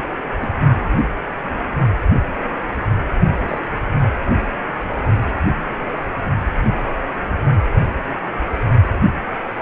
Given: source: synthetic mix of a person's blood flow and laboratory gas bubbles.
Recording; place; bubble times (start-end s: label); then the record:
Doppler ultrasound of blood flow; precordium
0.39-0.52 s: bubbles
3.48-3.59 s: bubbles
From the record:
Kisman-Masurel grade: 122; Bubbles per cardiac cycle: 1 to 2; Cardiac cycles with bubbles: 10 to 50%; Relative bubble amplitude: moderate (0.250 to 0.450); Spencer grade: 2 (many but less than half of the cardiac periods contain bubble signals, singularly or in groups); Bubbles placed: only in the low amplitude regions of the cardiac cycle